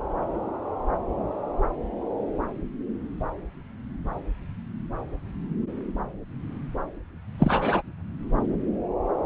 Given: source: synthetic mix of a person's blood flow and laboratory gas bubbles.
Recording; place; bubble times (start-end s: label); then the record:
Doppler ultrasound of blood flow; subclavian vein
7.39-7.82 s: bubbles
From the record:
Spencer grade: 1 (occasional bubble signal discernible with the cardiac motion signal, with majority of cardiac periods free of bubbles); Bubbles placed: anywhere in the cardiac cycle